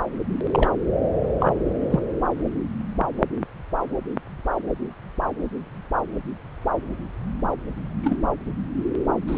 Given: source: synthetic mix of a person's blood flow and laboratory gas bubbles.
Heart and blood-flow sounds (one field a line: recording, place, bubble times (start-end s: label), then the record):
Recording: Doppler ultrasound of blood flow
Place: subclavian vein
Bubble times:
0.51-0.69 s: bubbles
1.40-1.61 s: bubbles
1.90-2.00 s: bubbles
8.03-8.16 s: bubbles
9.27-9.38 s: bubbles
From the record:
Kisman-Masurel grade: 122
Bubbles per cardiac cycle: 1 to 2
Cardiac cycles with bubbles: 10 to 50%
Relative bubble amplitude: moderate (0.250 to 0.450)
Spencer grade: 2 (many but less than half of the cardiac periods contain bubble signals, singularly or in groups)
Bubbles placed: anywhere in the cardiac cycle